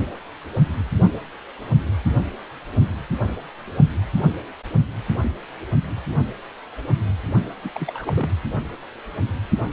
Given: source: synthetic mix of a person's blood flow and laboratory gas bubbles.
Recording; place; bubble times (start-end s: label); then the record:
Doppler ultrasound of blood flow; precordium
7.63-7.70 s: bubbles
7.74-8.31 s: bubbles
From the record:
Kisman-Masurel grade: 211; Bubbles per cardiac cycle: several, 3 to 8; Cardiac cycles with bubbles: 1 to 10%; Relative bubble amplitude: barely perceptible (0.100 to 0.250); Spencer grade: 1 (occasional bubble signal discernible with the cardiac motion signal, with majority of cardiac periods free of bubbles); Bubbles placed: anywhere in the cardiac cycle